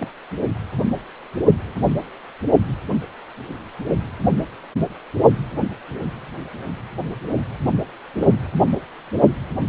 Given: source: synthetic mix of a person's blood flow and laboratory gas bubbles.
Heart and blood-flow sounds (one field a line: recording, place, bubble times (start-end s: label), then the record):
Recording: Doppler ultrasound of blood flow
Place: precordium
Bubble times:
0.00-0.09 s: bubbles
8.21-8.27 s: bubbles
9.57-9.69 s: bubbles
From the record:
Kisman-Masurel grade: 121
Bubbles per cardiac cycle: 1 to 2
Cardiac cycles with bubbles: 10 to 50%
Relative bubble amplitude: barely perceptible (0.100 to 0.250)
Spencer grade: 2 (many but less than half of the cardiac periods contain bubble signals, singularly or in groups)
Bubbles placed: only in the low amplitude regions of the cardiac cycle